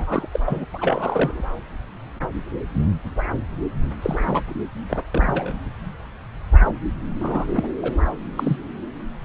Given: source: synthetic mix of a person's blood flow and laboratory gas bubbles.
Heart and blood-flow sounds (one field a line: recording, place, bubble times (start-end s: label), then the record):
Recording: Doppler ultrasound of blood flow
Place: subclavian vein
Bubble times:
0.00-0.28 s: bubbles
0.32-0.40 s: bubbles
0.46-0.65 s: bubbles
0.74-1.43 s: bubbles
4.02-4.42 s: bubbles
4.89-5.00 s: bubbles
5.12-5.52 s: bubbles
7.19-7.45 s: bubbles
7.51-7.67 s: bubbles
7.82-7.94 s: bubbles
8.37-8.57 s: bubbles
From the record:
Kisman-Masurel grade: 222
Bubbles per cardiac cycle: several, 3 to 8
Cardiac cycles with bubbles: 10 to 50%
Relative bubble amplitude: moderate (0.250 to 0.450)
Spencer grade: 2 (many but less than half of the cardiac periods contain bubble signals, singularly or in groups)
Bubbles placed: anywhere in the cardiac cycle